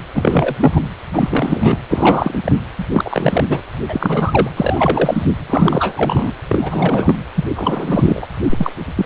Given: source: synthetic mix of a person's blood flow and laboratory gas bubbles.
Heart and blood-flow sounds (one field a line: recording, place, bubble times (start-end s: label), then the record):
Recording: Doppler ultrasound of blood flow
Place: precordium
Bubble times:
0.12-0.55 s: bubbles
0.60-0.80 s: bubbles
1.13-1.79 s: bubbles
1.90-2.40 s: bubbles
2.44-2.56 s: bubbles
2.78-2.85 s: bubbles
2.92-3.44 s: bubbles
3.50-3.62 s: bubbles
3.88-4.50 s: bubbles
4.56-5.25 s: bubbles
5.50-6.33 s: bubbles
6.47-7.15 s: bubbles
7.34-7.45 s: bubbles
7.56-8.27 s: bubbles
8.51-8.72 s: bubbles
8.96-9.06 s: bubbles
From the record:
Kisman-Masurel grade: 343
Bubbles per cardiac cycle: rolling drumbeat, 9 or more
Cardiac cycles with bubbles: 100%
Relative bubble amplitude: loud (0.450 to 0.775)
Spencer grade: 3 (all of the cardiac periods contain showers or single bubble signals, but not dominating or overriding the cardiac motion signals)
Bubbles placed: anywhere in the cardiac cycle